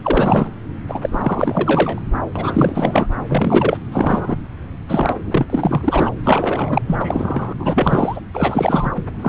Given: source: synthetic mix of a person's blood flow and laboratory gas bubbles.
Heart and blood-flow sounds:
Doppler ultrasound of blood flow; subclavian vein
0.03-0.51 s: bubbles
0.88-2.02 s: bubbles
2.36-3.07 s: bubbles
3.28-3.77 s: bubbles
3.92-4.36 s: bubbles
4.88-5.16 s: bubbles
5.27-5.46 s: bubbles
5.50-6.13 s: bubbles
6.23-6.82 s: bubbles
6.87-7.54 s: bubbles
7.60-8.21 s: bubbles
8.33-8.92 s: bubbles
8.96-9.02 s: bubbles
9.19-9.29 s: bubbles
From the record:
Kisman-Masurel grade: 444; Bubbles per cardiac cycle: continuous sound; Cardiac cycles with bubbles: 100%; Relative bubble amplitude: maximal (0.775 to 0.999); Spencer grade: 4 (maximum detectable bubble signal sounding continuously throughout systole and diastole of every cardiac period, and overriding the amplitude of the normal cardiac signals); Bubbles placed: anywhere in the cardiac cycle

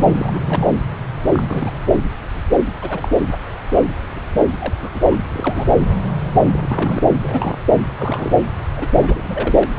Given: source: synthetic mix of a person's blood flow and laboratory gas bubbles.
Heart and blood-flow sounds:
Doppler ultrasound of blood flow; subclavian vein
0.14-0.39 s: bubbles
0.45-0.67 s: bubbles
1.32-1.71 s: bubbles
2.81-3.08 s: bubbles
4.59-4.74 s: bubbles
4.82-4.91 s: bubbles
4.94-5.02 s: bubbles
5.11-5.15 s: bubbles
5.32-5.67 s: bubbles
6.52-7.02 s: bubbles
7.23-7.57 s: bubbles
7.72-7.82 s: bubbles
7.98-8.30 s: bubbles
8.76-8.88 s: bubbles
8.96-9.70 s: bubbles
From the record:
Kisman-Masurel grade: 232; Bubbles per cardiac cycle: several, 3 to 8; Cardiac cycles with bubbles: 50 to 99%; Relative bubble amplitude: moderate (0.250 to 0.450); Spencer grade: 3 (all of the cardiac periods contain showers or single bubble signals, but not dominating or overriding the cardiac motion signals); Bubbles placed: anywhere in the cardiac cycle

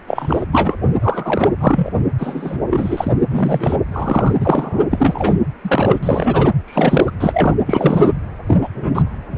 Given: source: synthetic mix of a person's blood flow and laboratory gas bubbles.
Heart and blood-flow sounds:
Doppler ultrasound of blood flow; precordium
0.07-0.45 s: bubbles
0.51-0.77 s: bubbles
1.02-1.50 s: bubbles
1.60-1.91 s: bubbles
2.18-2.58 s: bubbles
2.70-3.12 s: bubbles
3.31-3.76 s: bubbles
3.91-4.36 s: bubbles
4.41-4.83 s: bubbles
4.91-5.35 s: bubbles
5.62-6.00 s: bubbles
6.03-6.50 s: bubbles
6.67-7.11 s: bubbles
7.20-7.55 s: bubbles
7.66-8.13 s: bubbles
8.47-8.58 s: bubbles
8.61-8.69 s: bubbles
8.74-9.02 s: bubbles
9.31-9.38 s: bubbles
From the record:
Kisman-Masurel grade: 243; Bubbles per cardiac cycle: several, 3 to 8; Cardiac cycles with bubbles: 100%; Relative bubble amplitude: loud (0.450 to 0.775); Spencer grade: 3 (all of the cardiac periods contain showers or single bubble signals, but not dominating or overriding the cardiac motion signals); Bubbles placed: anywhere in the cardiac cycle

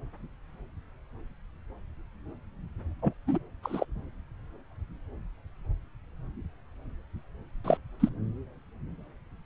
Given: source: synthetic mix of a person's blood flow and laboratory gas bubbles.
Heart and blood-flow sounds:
Doppler ultrasound of blood flow; subclavian vein
3.02-3.13 s: bubbles
3.27-3.38 s: bubbles
3.63-3.85 s: bubbles
7.64-7.77 s: bubbles
8.00-8.09 s: bubbles
From the record:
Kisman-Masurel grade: 122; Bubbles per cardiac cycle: 1 to 2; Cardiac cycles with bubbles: 10 to 50%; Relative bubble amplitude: moderate (0.250 to 0.450); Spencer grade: 2 (many but less than half of the cardiac periods contain bubble signals, singularly or in groups); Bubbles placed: anywhere in the cardiac cycle

